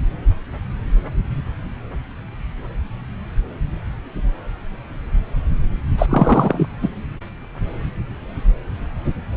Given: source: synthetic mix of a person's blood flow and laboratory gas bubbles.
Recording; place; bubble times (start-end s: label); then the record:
Doppler ultrasound of blood flow; subclavian vein
5.98-6.06 s: bubbles
6.10-6.67 s: bubbles
6.82-6.88 s: bubbles
From the record:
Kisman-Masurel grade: 213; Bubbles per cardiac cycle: several, 3 to 8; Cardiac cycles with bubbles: 1 to 10%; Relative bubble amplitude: loud (0.450 to 0.775); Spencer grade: 1 (occasional bubble signal discernible with the cardiac motion signal, with majority of cardiac periods free of bubbles); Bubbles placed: anywhere in the cardiac cycle